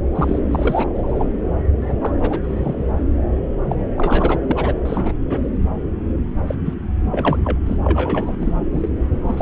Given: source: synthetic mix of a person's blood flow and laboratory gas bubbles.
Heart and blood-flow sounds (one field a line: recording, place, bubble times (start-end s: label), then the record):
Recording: Doppler ultrasound of blood flow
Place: subclavian vein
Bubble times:
0.15-0.39 s: bubbles
0.51-0.85 s: bubbles
0.94-1.25 s: bubbles
1.81-1.94 s: bubbles
2.01-2.17 s: bubbles
2.21-2.40 s: bubbles
2.43-2.92 s: bubbles
3.70-3.76 s: bubbles
3.97-4.39 s: bubbles
4.47-4.75 s: bubbles
4.85-5.19 s: bubbles
5.29-5.39 s: bubbles
6.47-6.55 s: bubbles
6.65-6.74 s: bubbles
7.12-7.58 s: bubbles
7.66-7.76 s: bubbles
7.83-8.57 s: bubbles
8.71-8.89 s: bubbles
9.26-9.41 s: bubbles
From the record:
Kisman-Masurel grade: 242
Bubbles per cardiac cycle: several, 3 to 8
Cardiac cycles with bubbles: 100%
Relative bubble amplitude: moderate (0.250 to 0.450)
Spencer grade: 3 (all of the cardiac periods contain showers or single bubble signals, but not dominating or overriding the cardiac motion signals)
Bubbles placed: anywhere in the cardiac cycle